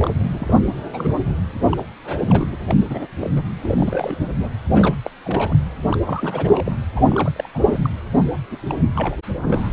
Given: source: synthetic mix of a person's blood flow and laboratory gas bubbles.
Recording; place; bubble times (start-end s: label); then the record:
Doppler ultrasound of blood flow; precordium
0.00-0.54 s: bubbles
0.83-0.86 s: bubbles
0.93-1.08 s: bubbles
1.72-1.83 s: bubbles
2.04-2.57 s: bubbles
2.68-2.76 s: bubbles
2.81-2.85 s: bubbles
2.90-3.07 s: bubbles
3.20-3.31 s: bubbles
3.35-3.42 s: bubbles
3.62-4.17 s: bubbles
4.40-4.49 s: bubbles
4.71-4.97 s: bubbles
5.04-5.11 s: bubbles
5.24-5.55 s: bubbles
5.89-6.00 s: bubbles
6.04-6.76 s: bubbles
6.96-7.06 s: bubbles
7.08-7.32 s: bubbles
7.36-7.49 s: bubbles
7.54-7.59 s: bubbles
7.63-7.91 s: bubbles
8.50-8.57 s: bubbles
8.69-8.76 s: bubbles
8.95-9.17 s: bubbles
9.37-9.73 s: bubbles
From the record:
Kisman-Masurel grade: 342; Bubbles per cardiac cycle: rolling drumbeat, 9 or more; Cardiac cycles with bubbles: 100%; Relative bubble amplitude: moderate (0.250 to 0.450); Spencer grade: 3 (all of the cardiac periods contain showers or single bubble signals, but not dominating or overriding the cardiac motion signals); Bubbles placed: anywhere in the cardiac cycle